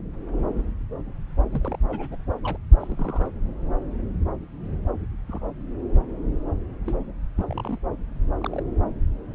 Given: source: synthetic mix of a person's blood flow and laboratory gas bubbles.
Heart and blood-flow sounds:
Doppler ultrasound of blood flow; subclavian vein
1.51-1.79 s: bubbles
1.88-2.17 s: bubbles
2.44-2.57 s: bubbles
2.79-3.26 s: bubbles
5.28-5.41 s: bubbles
6.86-6.96 s: bubbles
7.37-7.79 s: bubbles
8.39-8.62 s: bubbles
From the record:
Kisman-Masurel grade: 121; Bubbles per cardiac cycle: 1 to 2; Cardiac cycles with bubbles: 10 to 50%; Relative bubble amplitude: barely perceptible (0.100 to 0.250); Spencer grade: 2 (many but less than half of the cardiac periods contain bubble signals, singularly or in groups); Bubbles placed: anywhere in the cardiac cycle

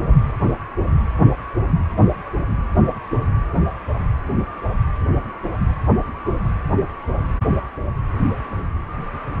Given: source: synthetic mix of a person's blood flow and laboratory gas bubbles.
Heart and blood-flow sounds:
Doppler ultrasound of blood flow; precordium
no bubbles
From the record:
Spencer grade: 0 (complete lack of bubble signals)

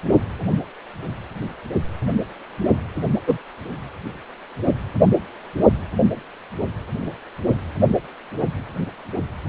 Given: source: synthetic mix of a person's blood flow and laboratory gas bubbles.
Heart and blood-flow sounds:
Doppler ultrasound of blood flow; precordium
3.27-3.38 s: bubbles
From the record:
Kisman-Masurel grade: 123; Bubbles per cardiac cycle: 1 to 2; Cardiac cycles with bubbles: 10 to 50%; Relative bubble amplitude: loud (0.450 to 0.775); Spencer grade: 2 (many but less than half of the cardiac periods contain bubble signals, singularly or in groups); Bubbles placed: only in the low amplitude regions of the cardiac cycle

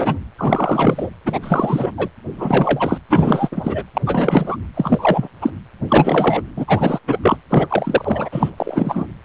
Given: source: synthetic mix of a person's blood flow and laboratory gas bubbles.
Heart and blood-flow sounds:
Doppler ultrasound of blood flow; precordium
0.00-0.20 s: bubbles
0.38-1.10 s: bubbles
1.25-1.39 s: bubbles
1.42-1.92 s: bubbles
1.98-2.08 s: bubbles
2.37-2.98 s: bubbles
3.10-3.49 s: bubbles
3.52-3.82 s: bubbles
3.94-4.01 s: bubbles
4.06-4.57 s: bubbles
4.74-5.29 s: bubbles
5.42-5.50 s: bubbles
5.88-6.42 s: bubbles
6.56-6.64 s: bubbles
6.67-6.99 s: bubbles
7.07-7.18 s: bubbles
7.22-7.36 s: bubbles
7.50-8.29 s: bubbles
8.32-8.50 s: bubbles
8.58-9.07 s: bubbles
From the record:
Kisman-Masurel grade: 343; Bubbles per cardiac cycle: rolling drumbeat, 9 or more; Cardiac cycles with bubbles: 100%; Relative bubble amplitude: loud (0.450 to 0.775); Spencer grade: 3 (all of the cardiac periods contain showers or single bubble signals, but not dominating or overriding the cardiac motion signals); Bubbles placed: anywhere in the cardiac cycle

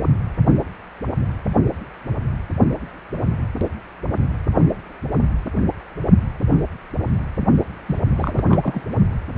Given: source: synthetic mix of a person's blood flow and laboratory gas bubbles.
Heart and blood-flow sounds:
Doppler ultrasound of blood flow; precordium
7.86-8.00 s: bubbles
8.16-8.41 s: bubbles
8.48-8.82 s: bubbles
From the record:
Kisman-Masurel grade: 212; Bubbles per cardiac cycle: several, 3 to 8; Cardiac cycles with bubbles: 1 to 10%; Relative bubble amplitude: moderate (0.250 to 0.450); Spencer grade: 1 (occasional bubble signal discernible with the cardiac motion signal, with majority of cardiac periods free of bubbles); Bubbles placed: only in the low amplitude regions of the cardiac cycle

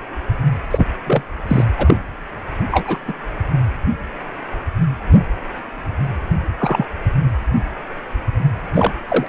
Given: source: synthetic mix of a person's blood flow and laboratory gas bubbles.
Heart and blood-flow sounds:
Doppler ultrasound of blood flow; precordium
0.71-0.88 s: bubbles
1.06-1.22 s: bubbles
1.48-1.64 s: bubbles
1.77-1.97 s: bubbles
2.71-3.03 s: bubbles
3.07-3.14 s: bubbles
6.58-6.90 s: bubbles
8.74-8.93 s: bubbles
9.08-9.29 s: bubbles
From the record:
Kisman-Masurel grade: 233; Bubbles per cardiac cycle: several, 3 to 8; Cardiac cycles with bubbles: 50 to 99%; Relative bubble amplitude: loud (0.450 to 0.775); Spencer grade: 3 (all of the cardiac periods contain showers or single bubble signals, but not dominating or overriding the cardiac motion signals); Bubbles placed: anywhere in the cardiac cycle

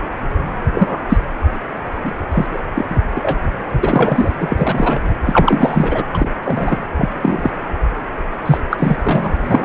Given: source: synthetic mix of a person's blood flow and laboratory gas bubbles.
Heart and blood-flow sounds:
Doppler ultrasound of blood flow; precordium
0.72-0.98 s: bubbles
1.09-1.19 s: bubbles
2.04-2.12 s: bubbles
2.31-2.58 s: bubbles
2.74-2.85 s: bubbles
2.90-3.00 s: bubbles
3.16-3.46 s: bubbles
3.83-4.32 s: bubbles
4.38-5.00 s: bubbles
5.23-6.03 s: bubbles
6.14-6.28 s: bubbles
6.44-6.82 s: bubbles
6.96-7.09 s: bubbles
7.22-7.50 s: bubbles
8.46-8.58 s: bubbles
8.71-8.96 s: bubbles
9.03-9.34 s: bubbles
9.45-9.65 s: bubbles
From the record:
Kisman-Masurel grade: 233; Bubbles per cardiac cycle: several, 3 to 8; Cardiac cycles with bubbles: 50 to 99%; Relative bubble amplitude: loud (0.450 to 0.775); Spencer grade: 3 (all of the cardiac periods contain showers or single bubble signals, but not dominating or overriding the cardiac motion signals); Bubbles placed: anywhere in the cardiac cycle

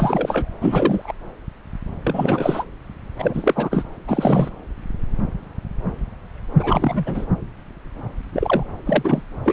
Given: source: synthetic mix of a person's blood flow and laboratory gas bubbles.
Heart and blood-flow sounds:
Doppler ultrasound of blood flow; subclavian vein
0.00-0.55 s: bubbles
0.60-1.14 s: bubbles
2.04-2.64 s: bubbles
3.18-3.84 s: bubbles
4.07-4.50 s: bubbles
6.59-7.26 s: bubbles
8.33-8.63 s: bubbles
8.86-9.22 s: bubbles
9.45-9.53 s: bubbles
From the record:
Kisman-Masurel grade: 333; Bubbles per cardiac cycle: rolling drumbeat, 9 or more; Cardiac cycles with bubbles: 50 to 99%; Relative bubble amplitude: loud (0.450 to 0.775); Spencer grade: 3 (all of the cardiac periods contain showers or single bubble signals, but not dominating or overriding the cardiac motion signals); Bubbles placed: anywhere in the cardiac cycle

